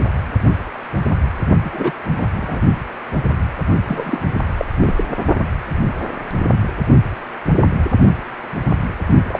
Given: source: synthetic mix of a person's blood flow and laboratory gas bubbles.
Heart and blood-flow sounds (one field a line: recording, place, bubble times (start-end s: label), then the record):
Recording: Doppler ultrasound of blood flow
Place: precordium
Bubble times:
1.63-1.70 s: bubbles
1.73-1.91 s: bubbles
2.12-2.27 s: bubbles
2.36-2.62 s: bubbles
3.87-4.19 s: bubbles
4.58-4.65 s: bubbles
4.81-5.04 s: bubbles
9.29-9.40 s: bubbles
From the record:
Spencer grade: 2 (many but less than half of the cardiac periods contain bubble signals, singularly or in groups)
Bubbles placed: only in the low amplitude regions of the cardiac cycle